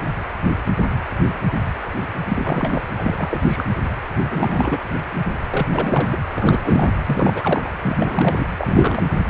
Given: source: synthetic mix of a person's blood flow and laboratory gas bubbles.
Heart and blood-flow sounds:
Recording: Doppler ultrasound of blood flow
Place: precordium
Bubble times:
2.27-2.81 s: bubbles
2.97-3.42 s: bubbles
3.47-3.66 s: bubbles
4.29-4.79 s: bubbles
5.50-5.68 s: bubbles
5.71-6.08 s: bubbles
6.12-6.17 s: bubbles
6.34-6.92 s: bubbles
7.05-7.69 s: bubbles
7.82-8.45 s: bubbles
8.56-9.02 s: bubbles
From the record:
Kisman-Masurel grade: 332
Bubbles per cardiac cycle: rolling drumbeat, 9 or more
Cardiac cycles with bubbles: 50 to 99%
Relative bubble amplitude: moderate (0.250 to 0.450)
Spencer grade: 3 (all of the cardiac periods contain showers or single bubble signals, but not dominating or overriding the cardiac motion signals)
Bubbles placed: anywhere in the cardiac cycle

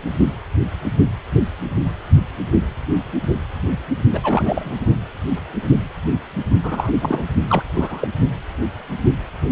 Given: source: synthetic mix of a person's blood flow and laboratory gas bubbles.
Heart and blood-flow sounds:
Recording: Doppler ultrasound of blood flow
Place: precordium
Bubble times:
4.11-4.85 s: bubbles
6.63-6.94 s: bubbles
7.01-7.24 s: bubbles
7.48-7.63 s: bubbles
7.75-8.08 s: bubbles
From the record:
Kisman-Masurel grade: 222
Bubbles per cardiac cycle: several, 3 to 8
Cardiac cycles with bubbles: 10 to 50%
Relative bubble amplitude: moderate (0.250 to 0.450)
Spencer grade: 2 (many but less than half of the cardiac periods contain bubble signals, singularly or in groups)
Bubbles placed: only in the low amplitude regions of the cardiac cycle

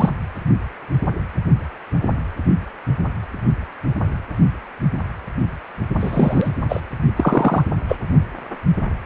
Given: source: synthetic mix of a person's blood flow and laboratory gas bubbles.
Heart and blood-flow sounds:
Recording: Doppler ultrasound of blood flow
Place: precordium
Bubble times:
0.00-0.10 s: bubbles
5.99-6.49 s: bubbles
6.68-6.80 s: bubbles
7.16-7.64 s: bubbles
7.88-7.96 s: bubbles
From the record:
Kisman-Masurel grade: 233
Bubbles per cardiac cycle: several, 3 to 8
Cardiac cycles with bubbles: 50 to 99%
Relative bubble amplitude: loud (0.450 to 0.775)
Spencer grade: 3 (all of the cardiac periods contain showers or single bubble signals, but not dominating or overriding the cardiac motion signals)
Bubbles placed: only in the low amplitude regions of the cardiac cycle

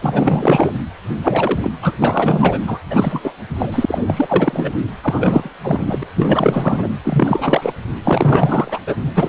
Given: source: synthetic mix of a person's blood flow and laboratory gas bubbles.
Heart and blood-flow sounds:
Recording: Doppler ultrasound of blood flow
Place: precordium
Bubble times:
0.01-0.73 s: bubbles
1.22-1.71 s: bubbles
1.82-1.95 s: bubbles
1.99-2.59 s: bubbles
2.67-2.79 s: bubbles
2.90-3.33 s: bubbles
3.58-4.04 s: bubbles
4.07-4.71 s: bubbles
5.01-5.49 s: bubbles
5.63-5.98 s: bubbles
6.01-6.04 s: bubbles
6.15-6.90 s: bubbles
7.04-7.73 s: bubbles
8.04-8.79 s: bubbles
8.87-8.96 s: bubbles
9.14-9.29 s: bubbles
From the record:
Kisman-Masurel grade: 444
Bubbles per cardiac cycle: continuous sound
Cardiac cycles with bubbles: 100%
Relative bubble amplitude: maximal (0.775 to 0.999)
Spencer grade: 4 (maximum detectable bubble signal sounding continuously throughout systole and diastole of every cardiac period, and overriding the amplitude of the normal cardiac signals)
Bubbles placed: anywhere in the cardiac cycle

